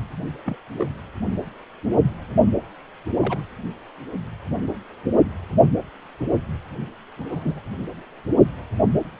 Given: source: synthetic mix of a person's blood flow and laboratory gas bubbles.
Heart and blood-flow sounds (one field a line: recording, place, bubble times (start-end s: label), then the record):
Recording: Doppler ultrasound of blood flow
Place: precordium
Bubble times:
0.46-0.55 s: bubbles
0.77-0.93 s: bubbles
3.17-3.42 s: bubbles
7.18-7.61 s: bubbles
From the record:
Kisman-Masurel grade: 121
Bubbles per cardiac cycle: 1 to 2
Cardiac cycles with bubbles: 10 to 50%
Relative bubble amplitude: barely perceptible (0.100 to 0.250)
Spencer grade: 2 (many but less than half of the cardiac periods contain bubble signals, singularly or in groups)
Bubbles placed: only in the low amplitude regions of the cardiac cycle